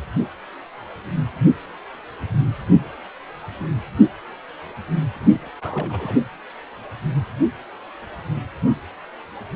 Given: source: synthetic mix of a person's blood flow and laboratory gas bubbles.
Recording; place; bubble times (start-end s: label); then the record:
Doppler ultrasound of blood flow; precordium
5.13-5.50 s: bubbles
5.61-6.15 s: bubbles
From the record:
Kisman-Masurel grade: 221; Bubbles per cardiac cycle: several, 3 to 8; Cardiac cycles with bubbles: 10 to 50%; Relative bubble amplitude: barely perceptible (0.100 to 0.250); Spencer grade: 2 (many but less than half of the cardiac periods contain bubble signals, singularly or in groups); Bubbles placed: anywhere in the cardiac cycle